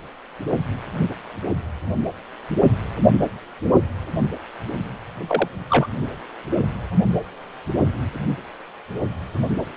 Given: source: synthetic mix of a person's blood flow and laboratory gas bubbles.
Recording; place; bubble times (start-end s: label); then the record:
Doppler ultrasound of blood flow; precordium
5.27-5.48 s: bubbles
5.69-5.87 s: bubbles
From the record:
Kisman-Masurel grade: 112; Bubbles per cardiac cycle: 1 to 2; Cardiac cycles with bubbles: 1 to 10%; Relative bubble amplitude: moderate (0.250 to 0.450); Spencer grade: 1 (occasional bubble signal discernible with the cardiac motion signal, with majority of cardiac periods free of bubbles); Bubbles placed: only in the low amplitude regions of the cardiac cycle